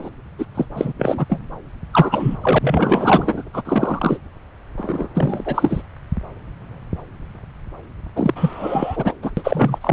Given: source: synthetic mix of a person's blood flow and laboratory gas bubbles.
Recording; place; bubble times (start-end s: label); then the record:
Doppler ultrasound of blood flow; subclavian vein
0.00-0.10 s: bubbles
0.39-0.46 s: bubbles
0.54-0.65 s: bubbles
0.75-0.92 s: bubbles
0.98-1.26 s: bubbles
1.29-1.40 s: bubbles
1.93-2.37 s: bubbles
2.42-3.43 s: bubbles
3.53-3.62 s: bubbles
3.65-4.18 s: bubbles
4.77-5.08 s: bubbles
5.15-5.83 s: bubbles
8.15-9.13 s: bubbles
9.22-9.31 s: bubbles
9.37-9.79 s: bubbles
9.81-9.93 s: bubbles
From the record:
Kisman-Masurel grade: 333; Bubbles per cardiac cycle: rolling drumbeat, 9 or more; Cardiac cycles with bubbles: 50 to 99%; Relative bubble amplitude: loud (0.450 to 0.775); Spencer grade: 3 (all of the cardiac periods contain showers or single bubble signals, but not dominating or overriding the cardiac motion signals); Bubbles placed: anywhere in the cardiac cycle